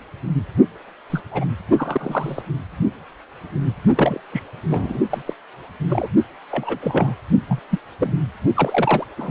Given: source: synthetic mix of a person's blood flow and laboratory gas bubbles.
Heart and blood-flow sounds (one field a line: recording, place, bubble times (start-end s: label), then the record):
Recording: Doppler ultrasound of blood flow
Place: precordium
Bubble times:
1.10-1.21 s: bubbles
1.31-1.45 s: bubbles
1.72-2.43 s: bubbles
3.95-4.21 s: bubbles
4.32-4.43 s: bubbles
4.67-4.99 s: bubbles
5.09-5.22 s: bubbles
5.25-5.33 s: bubbles
5.89-6.08 s: bubbles
6.50-6.78 s: bubbles
6.81-7.14 s: bubbles
7.48-7.59 s: bubbles
7.70-7.79 s: bubbles
8.00-8.14 s: bubbles
8.54-9.04 s: bubbles
9.17-9.31 s: bubbles
From the record:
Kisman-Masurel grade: 232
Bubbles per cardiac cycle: several, 3 to 8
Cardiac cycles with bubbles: 50 to 99%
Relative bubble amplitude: moderate (0.250 to 0.450)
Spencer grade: 3 (all of the cardiac periods contain showers or single bubble signals, but not dominating or overriding the cardiac motion signals)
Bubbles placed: only in the low amplitude regions of the cardiac cycle